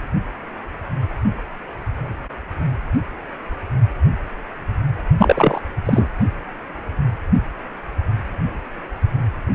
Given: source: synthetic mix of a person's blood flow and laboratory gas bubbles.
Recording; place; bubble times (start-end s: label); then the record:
Doppler ultrasound of blood flow; precordium
5.18-5.61 s: bubbles
5.85-6.10 s: bubbles
From the record:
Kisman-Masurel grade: 223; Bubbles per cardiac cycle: several, 3 to 8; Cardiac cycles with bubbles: 10 to 50%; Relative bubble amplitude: loud (0.450 to 0.775); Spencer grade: 2 (many but less than half of the cardiac periods contain bubble signals, singularly or in groups); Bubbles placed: only in the low amplitude regions of the cardiac cycle